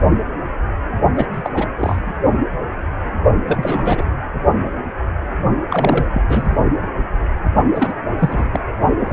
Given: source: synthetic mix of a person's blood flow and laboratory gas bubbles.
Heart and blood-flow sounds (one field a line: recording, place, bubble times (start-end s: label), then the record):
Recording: Doppler ultrasound of blood flow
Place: precordium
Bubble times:
1.16-1.26 s: bubbles
1.33-1.68 s: bubbles
1.78-2.12 s: bubbles
3.47-4.05 s: bubbles
5.70-6.08 s: bubbles
6.12-6.22 s: bubbles
6.28-6.56 s: bubbles
7.75-7.94 s: bubbles
8.19-8.60 s: bubbles
8.99-9.13 s: bubbles
From the record:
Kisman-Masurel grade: 332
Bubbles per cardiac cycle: rolling drumbeat, 9 or more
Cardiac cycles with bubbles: 50 to 99%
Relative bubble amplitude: moderate (0.250 to 0.450)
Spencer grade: 3 (all of the cardiac periods contain showers or single bubble signals, but not dominating or overriding the cardiac motion signals)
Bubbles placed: only in the low amplitude regions of the cardiac cycle